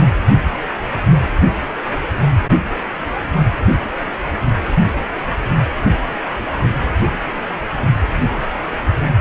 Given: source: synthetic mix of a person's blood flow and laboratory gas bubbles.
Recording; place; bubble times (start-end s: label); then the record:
Doppler ultrasound of blood flow; precordium
0.00-0.04 s: bubbles
From the record:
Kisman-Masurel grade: 112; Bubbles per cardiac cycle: 1 to 2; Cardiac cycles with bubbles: 1 to 10%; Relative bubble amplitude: moderate (0.250 to 0.450); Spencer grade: 1 (occasional bubble signal discernible with the cardiac motion signal, with majority of cardiac periods free of bubbles); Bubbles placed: only in the low amplitude regions of the cardiac cycle